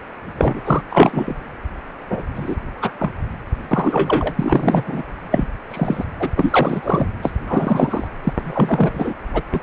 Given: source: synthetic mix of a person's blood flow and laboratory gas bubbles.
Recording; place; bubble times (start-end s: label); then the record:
Doppler ultrasound of blood flow; precordium
0.38-0.60 s: bubbles
0.65-0.81 s: bubbles
0.90-1.35 s: bubbles
2.09-2.22 s: bubbles
2.35-2.55 s: bubbles
2.81-2.90 s: bubbles
2.99-3.12 s: bubbles
3.71-4.34 s: bubbles
4.39-4.83 s: bubbles
4.87-5.03 s: bubbles
5.31-5.47 s: bubbles
5.71-6.05 s: bubbles
6.19-6.30 s: bubbles
6.36-7.06 s: bubbles
7.22-7.33 s: bubbles
7.48-8.07 s: bubbles
8.23-8.33 s: bubbles
8.37-9.13 s: bubbles
9.33-9.42 s: bubbles
9.52-9.60 s: bubbles
From the record:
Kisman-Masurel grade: 243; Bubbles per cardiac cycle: several, 3 to 8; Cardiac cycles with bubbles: 100%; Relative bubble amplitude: loud (0.450 to 0.775); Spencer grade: 3 (all of the cardiac periods contain showers or single bubble signals, but not dominating or overriding the cardiac motion signals); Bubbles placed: anywhere in the cardiac cycle